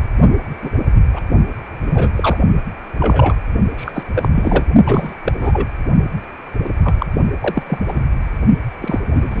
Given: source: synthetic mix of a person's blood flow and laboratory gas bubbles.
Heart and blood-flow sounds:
Doppler ultrasound of blood flow; precordium
0.61-0.69 s: bubbles
1.13-1.22 s: bubbles
1.86-2.12 s: bubbles
2.16-2.37 s: bubbles
2.99-3.35 s: bubbles
3.76-4.03 s: bubbles
4.14-4.28 s: bubbles
4.35-4.67 s: bubbles
4.85-5.14 s: bubbles
5.25-5.32 s: bubbles
5.42-5.67 s: bubbles
6.63-6.69 s: bubbles
6.84-6.95 s: bubbles
6.98-7.06 s: bubbles
7.40-7.62 s: bubbles
7.66-7.78 s: bubbles
7.88-8.02 s: bubbles
8.80-9.40 s: bubbles
From the record:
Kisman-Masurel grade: 233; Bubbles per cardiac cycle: several, 3 to 8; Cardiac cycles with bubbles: 50 to 99%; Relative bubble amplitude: loud (0.450 to 0.775); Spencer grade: 3 (all of the cardiac periods contain showers or single bubble signals, but not dominating or overriding the cardiac motion signals); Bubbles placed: only in the low amplitude regions of the cardiac cycle

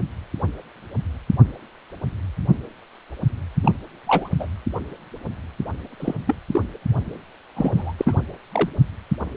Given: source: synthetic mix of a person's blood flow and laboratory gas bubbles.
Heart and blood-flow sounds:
Doppler ultrasound of blood flow; precordium
3.62-3.72 s: bubbles
4.07-4.29 s: bubbles
4.40-4.47 s: bubbles
6.00-6.15 s: bubbles
6.27-6.35 s: bubbles
6.51-6.62 s: bubbles
7.56-7.93 s: bubbles
7.98-8.21 s: bubbles
8.52-8.69 s: bubbles
From the record:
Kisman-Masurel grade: 222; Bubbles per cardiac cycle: several, 3 to 8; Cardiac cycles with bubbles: 10 to 50%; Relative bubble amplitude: moderate (0.250 to 0.450); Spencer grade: 2 (many but less than half of the cardiac periods contain bubble signals, singularly or in groups); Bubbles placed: only in the low amplitude regions of the cardiac cycle

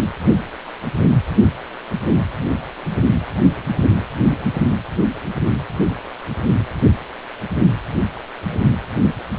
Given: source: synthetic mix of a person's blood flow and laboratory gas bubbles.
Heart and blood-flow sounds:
Doppler ultrasound of blood flow; precordium
no bubbles
From the record:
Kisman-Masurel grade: 000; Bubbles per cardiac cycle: 0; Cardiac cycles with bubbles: 0%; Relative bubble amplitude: no bubbles discernible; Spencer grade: 0 (complete lack of bubble signals)

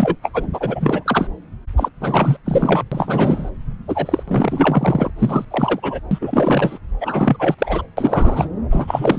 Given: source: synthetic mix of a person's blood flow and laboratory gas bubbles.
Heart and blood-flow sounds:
Doppler ultrasound of blood flow; subclavian vein
0.00-0.16 s: bubbles
0.23-0.30 s: bubbles
0.34-0.47 s: bubbles
0.53-1.28 s: bubbles
1.76-1.91 s: bubbles
2.00-2.37 s: bubbles
2.45-2.83 s: bubbles
2.92-3.50 s: bubbles
3.88-4.23 s: bubbles
4.27-5.10 s: bubbles
5.18-5.45 s: bubbles
5.50-5.80 s: bubbles
5.83-6.00 s: bubbles
6.11-6.18 s: bubbles
6.21-6.78 s: bubbles
7.00-7.56 s: bubbles
7.58-7.82 s: bubbles
7.97-8.48 s: bubbles
8.71-9.19 s: bubbles
From the record:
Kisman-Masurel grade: 343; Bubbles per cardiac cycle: rolling drumbeat, 9 or more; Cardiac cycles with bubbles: 100%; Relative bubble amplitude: loud (0.450 to 0.775); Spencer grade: 3 (all of the cardiac periods contain showers or single bubble signals, but not dominating or overriding the cardiac motion signals); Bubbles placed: anywhere in the cardiac cycle

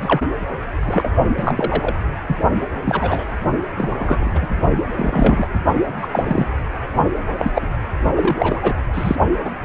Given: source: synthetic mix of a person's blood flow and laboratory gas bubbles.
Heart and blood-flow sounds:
Doppler ultrasound of blood flow; precordium
0.02-0.21 s: bubbles
0.84-1.08 s: bubbles
1.36-1.95 s: bubbles
2.27-2.37 s: bubbles
2.85-3.29 s: bubbles
3.76-4.31 s: bubbles
4.34-4.47 s: bubbles
4.97-5.46 s: bubbles
6.01-6.08 s: bubbles
6.11-6.50 s: bubbles
7.38-7.51 s: bubbles
7.55-7.66 s: bubbles
8.15-8.59 s: bubbles
8.62-8.80 s: bubbles
8.94-9.15 s: bubbles
9.45-9.50 s: bubbles
9.62-9.65 s: bubbles
From the record:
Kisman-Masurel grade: 242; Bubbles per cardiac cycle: several, 3 to 8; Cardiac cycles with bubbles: 100%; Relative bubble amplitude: moderate (0.250 to 0.450); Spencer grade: 3 (all of the cardiac periods contain showers or single bubble signals, but not dominating or overriding the cardiac motion signals); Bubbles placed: only in the low amplitude regions of the cardiac cycle

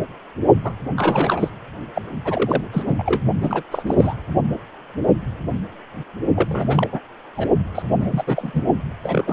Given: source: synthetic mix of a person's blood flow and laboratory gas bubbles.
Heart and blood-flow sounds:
Doppler ultrasound of blood flow; precordium
0.64-0.72 s: bubbles
0.97-1.52 s: bubbles
1.95-2.02 s: bubbles
2.24-2.63 s: bubbles
2.72-2.83 s: bubbles
2.86-2.95 s: bubbles
2.98-3.03 s: bubbles
3.05-3.21 s: bubbles
3.40-3.62 s: bubbles
3.71-3.82 s: bubbles
3.86-4.14 s: bubbles
6.36-6.88 s: bubbles
6.92-7.00 s: bubbles
7.36-7.50 s: bubbles
7.75-7.83 s: bubbles
8.00-8.24 s: bubbles
8.26-8.62 s: bubbles
9.03-9.33 s: bubbles
From the record:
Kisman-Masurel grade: 332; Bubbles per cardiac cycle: rolling drumbeat, 9 or more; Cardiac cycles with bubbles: 50 to 99%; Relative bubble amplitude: moderate (0.250 to 0.450); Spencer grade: 3 (all of the cardiac periods contain showers or single bubble signals, but not dominating or overriding the cardiac motion signals); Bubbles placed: only in the low amplitude regions of the cardiac cycle

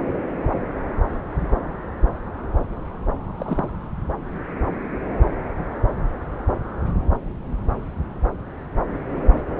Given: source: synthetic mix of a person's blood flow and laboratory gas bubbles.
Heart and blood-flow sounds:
Doppler ultrasound of blood flow; subclavian vein
3.37-3.69 s: bubbles
From the record:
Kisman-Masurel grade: 112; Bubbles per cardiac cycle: 1 to 2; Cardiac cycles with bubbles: 1 to 10%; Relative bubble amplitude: moderate (0.250 to 0.450); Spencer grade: 1 (occasional bubble signal discernible with the cardiac motion signal, with majority of cardiac periods free of bubbles); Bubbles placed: anywhere in the cardiac cycle

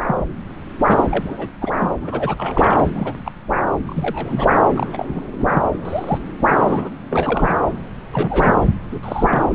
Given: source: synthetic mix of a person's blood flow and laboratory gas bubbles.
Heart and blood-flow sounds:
Doppler ultrasound of blood flow; subclavian vein
0.03-0.18 s: bubbles
0.87-1.02 s: bubbles
1.09-1.48 s: bubbles
1.61-1.76 s: bubbles
1.80-1.93 s: bubbles
2.01-2.87 s: bubbles
2.96-3.13 s: bubbles
3.25-3.31 s: bubbles
3.85-4.48 s: bubbles
4.74-4.87 s: bubbles
4.93-5.10 s: bubbles
5.12-5.63 s: bubbles
5.84-6.18 s: bubbles
6.59-6.89 s: bubbles
7.09-7.61 s: bubbles
8.12-8.54 s: bubbles
8.91-9.01 s: bubbles
9.03-9.55 s: bubbles
From the record:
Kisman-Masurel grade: 242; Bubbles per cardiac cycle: several, 3 to 8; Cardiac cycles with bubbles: 100%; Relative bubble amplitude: moderate (0.250 to 0.450); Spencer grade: 3 (all of the cardiac periods contain showers or single bubble signals, but not dominating or overriding the cardiac motion signals); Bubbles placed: anywhere in the cardiac cycle

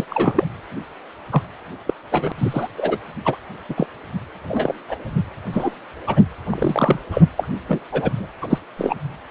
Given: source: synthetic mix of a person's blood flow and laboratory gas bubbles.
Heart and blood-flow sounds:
Doppler ultrasound of blood flow; precordium
0.00-0.04 s: bubbles
0.10-0.44 s: bubbles
1.30-1.43 s: bubbles
1.86-1.94 s: bubbles
2.11-2.32 s: bubbles
2.38-2.68 s: bubbles
2.77-2.98 s: bubbles
3.25-3.36 s: bubbles
3.69-3.74 s: bubbles
3.77-3.86 s: bubbles
4.48-4.75 s: bubbles
4.88-4.96 s: bubbles
5.53-5.76 s: bubbles
6.07-6.21 s: bubbles
6.50-6.99 s: bubbles
7.12-7.23 s: bubbles
7.37-7.48 s: bubbles
7.69-7.80 s: bubbles
7.92-8.27 s: bubbles
8.41-8.58 s: bubbles
8.77-8.96 s: bubbles
From the record:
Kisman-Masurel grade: 233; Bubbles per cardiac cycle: several, 3 to 8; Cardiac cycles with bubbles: 50 to 99%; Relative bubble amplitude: loud (0.450 to 0.775); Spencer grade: 3 (all of the cardiac periods contain showers or single bubble signals, but not dominating or overriding the cardiac motion signals); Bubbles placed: anywhere in the cardiac cycle

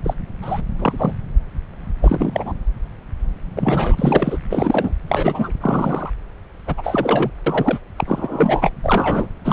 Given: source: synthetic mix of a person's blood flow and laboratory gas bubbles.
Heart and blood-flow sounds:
Doppler ultrasound of blood flow; subclavian vein
0.04-0.14 s: bubbles
0.42-0.61 s: bubbles
0.79-1.13 s: bubbles
2.02-2.54 s: bubbles
3.56-4.38 s: bubbles
4.50-4.94 s: bubbles
5.08-5.53 s: bubbles
5.61-6.10 s: bubbles
6.67-7.30 s: bubbles
7.46-7.79 s: bubbles
7.96-8.04 s: bubbles
8.07-8.70 s: bubbles
8.84-9.27 s: bubbles
9.45-9.53 s: bubbles
From the record:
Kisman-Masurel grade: 233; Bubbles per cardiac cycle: several, 3 to 8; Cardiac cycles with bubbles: 50 to 99%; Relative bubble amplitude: loud (0.450 to 0.775); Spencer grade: 3 (all of the cardiac periods contain showers or single bubble signals, but not dominating or overriding the cardiac motion signals); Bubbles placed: anywhere in the cardiac cycle

